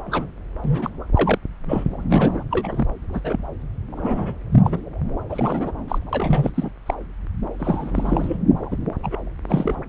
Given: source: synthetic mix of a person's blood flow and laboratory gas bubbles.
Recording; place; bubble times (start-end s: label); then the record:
Doppler ultrasound of blood flow; subclavian vein
0.06-0.31 s: bubbles
0.64-0.90 s: bubbles
1.15-1.38 s: bubbles
1.68-1.84 s: bubbles
2.10-2.44 s: bubbles
2.51-2.86 s: bubbles
3.13-3.20 s: bubbles
3.24-3.43 s: bubbles
3.97-4.35 s: bubbles
4.52-4.81 s: bubbles
5.29-5.72 s: bubbles
5.88-5.99 s: bubbles
6.12-6.52 s: bubbles
6.54-6.71 s: bubbles
6.86-6.94 s: bubbles
7.59-7.91 s: bubbles
7.95-8.37 s: bubbles
8.71-8.77 s: bubbles
9.03-9.22 s: bubbles
9.47-9.75 s: bubbles
From the record:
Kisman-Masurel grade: 242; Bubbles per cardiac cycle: several, 3 to 8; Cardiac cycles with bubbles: 100%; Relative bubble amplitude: moderate (0.250 to 0.450); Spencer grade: 3 (all of the cardiac periods contain showers or single bubble signals, but not dominating or overriding the cardiac motion signals); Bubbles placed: anywhere in the cardiac cycle